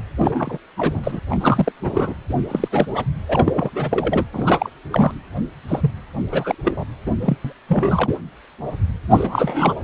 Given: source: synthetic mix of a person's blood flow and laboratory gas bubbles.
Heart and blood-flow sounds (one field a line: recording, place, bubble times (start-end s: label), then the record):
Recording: Doppler ultrasound of blood flow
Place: precordium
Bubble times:
0.18-0.58 s: bubbles
0.77-1.20 s: bubbles
1.30-1.37 s: bubbles
1.40-1.72 s: bubbles
1.83-2.14 s: bubbles
2.29-2.33 s: bubbles
2.49-2.68 s: bubbles
2.71-3.04 s: bubbles
3.27-4.25 s: bubbles
4.33-4.70 s: bubbles
4.92-5.12 s: bubbles
5.68-5.92 s: bubbles
6.30-6.55 s: bubbles
6.64-6.84 s: bubbles
7.06-7.12 s: bubbles
7.21-7.37 s: bubbles
7.45-7.53 s: bubbles
7.67-8.10 s: bubbles
9.10-9.73 s: bubbles
From the record:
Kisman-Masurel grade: 332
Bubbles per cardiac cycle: rolling drumbeat, 9 or more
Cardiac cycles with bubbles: 50 to 99%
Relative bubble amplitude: moderate (0.250 to 0.450)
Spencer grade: 3 (all of the cardiac periods contain showers or single bubble signals, but not dominating or overriding the cardiac motion signals)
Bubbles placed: anywhere in the cardiac cycle